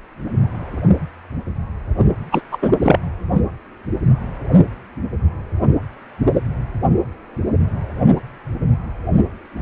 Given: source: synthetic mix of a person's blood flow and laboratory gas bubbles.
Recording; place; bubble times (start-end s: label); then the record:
Doppler ultrasound of blood flow; precordium
2.31-2.41 s: bubbles
2.51-2.57 s: bubbles
2.61-2.71 s: bubbles
2.82-2.98 s: bubbles
From the record:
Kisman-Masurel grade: 213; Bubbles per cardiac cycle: several, 3 to 8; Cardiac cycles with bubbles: 1 to 10%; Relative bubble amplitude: loud (0.450 to 0.775); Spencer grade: 1 (occasional bubble signal discernible with the cardiac motion signal, with majority of cardiac periods free of bubbles); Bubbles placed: anywhere in the cardiac cycle